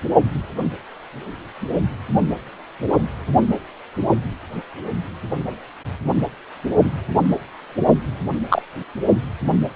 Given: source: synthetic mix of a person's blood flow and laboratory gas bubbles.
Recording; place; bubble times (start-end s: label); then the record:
Doppler ultrasound of blood flow; precordium
8.49-8.62 s: bubbles
From the record:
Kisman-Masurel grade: 113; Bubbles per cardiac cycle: 1 to 2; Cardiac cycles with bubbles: 1 to 10%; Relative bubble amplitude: loud (0.450 to 0.775); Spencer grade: 1 (occasional bubble signal discernible with the cardiac motion signal, with majority of cardiac periods free of bubbles); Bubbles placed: only in the low amplitude regions of the cardiac cycle